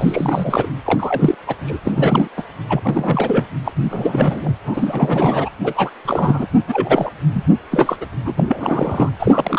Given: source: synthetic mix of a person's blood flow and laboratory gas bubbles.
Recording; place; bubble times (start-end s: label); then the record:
Doppler ultrasound of blood flow; precordium
0.00-0.66 s: bubbles
0.85-1.35 s: bubbles
1.47-1.55 s: bubbles
1.66-1.79 s: bubbles
1.84-2.28 s: bubbles
2.36-2.43 s: bubbles
2.69-3.46 s: bubbles
3.65-3.72 s: bubbles
3.75-4.54 s: bubbles
4.64-5.50 s: bubbles
5.64-5.90 s: bubbles
6.05-6.46 s: bubbles
6.68-7.11 s: bubbles
7.33-7.44 s: bubbles
7.71-7.96 s: bubbles
8.01-8.05 s: bubbles
8.25-8.34 s: bubbles
8.37-9.09 s: bubbles
9.19-9.59 s: bubbles
From the record:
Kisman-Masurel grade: 343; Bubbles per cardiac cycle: rolling drumbeat, 9 or more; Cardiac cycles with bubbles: 100%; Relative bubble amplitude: loud (0.450 to 0.775); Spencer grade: 3 (all of the cardiac periods contain showers or single bubble signals, but not dominating or overriding the cardiac motion signals); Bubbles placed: anywhere in the cardiac cycle